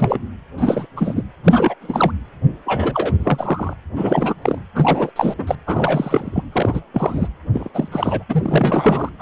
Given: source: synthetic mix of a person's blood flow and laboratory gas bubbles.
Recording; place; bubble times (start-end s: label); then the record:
Doppler ultrasound of blood flow; precordium
0.00-0.19 s: bubbles
0.57-0.86 s: bubbles
0.96-1.24 s: bubbles
1.44-1.75 s: bubbles
1.81-2.11 s: bubbles
2.65-3.12 s: bubbles
3.20-3.73 s: bubbles
3.97-4.35 s: bubbles
4.42-4.58 s: bubbles
4.75-5.11 s: bubbles
5.16-5.34 s: bubbles
5.38-5.55 s: bubbles
5.67-6.43 s: bubbles
6.52-6.81 s: bubbles
6.94-7.28 s: bubbles
7.54-7.69 s: bubbles
7.74-7.88 s: bubbles
7.91-8.23 s: bubbles
8.29-9.09 s: bubbles
9.19-9.22 s: bubbles
From the record:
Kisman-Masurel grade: 342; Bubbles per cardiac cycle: rolling drumbeat, 9 or more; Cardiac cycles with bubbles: 100%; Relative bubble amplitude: moderate (0.250 to 0.450); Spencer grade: 3 (all of the cardiac periods contain showers or single bubble signals, but not dominating or overriding the cardiac motion signals); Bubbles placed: anywhere in the cardiac cycle